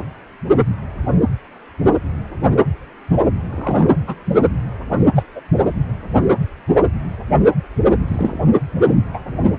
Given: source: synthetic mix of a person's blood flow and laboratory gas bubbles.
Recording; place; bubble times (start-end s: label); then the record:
Doppler ultrasound of blood flow; precordium
1.83-1.91 s: bubbles
3.51-3.90 s: bubbles
4.06-4.15 s: bubbles
5.15-5.23 s: bubbles
5.35-5.40 s: bubbles
8.08-8.45 s: bubbles
9.13-9.20 s: bubbles
From the record:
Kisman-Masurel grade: 122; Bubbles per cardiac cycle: 1 to 2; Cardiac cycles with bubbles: 10 to 50%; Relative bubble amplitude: moderate (0.250 to 0.450); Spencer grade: 2 (many but less than half of the cardiac periods contain bubble signals, singularly or in groups); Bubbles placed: anywhere in the cardiac cycle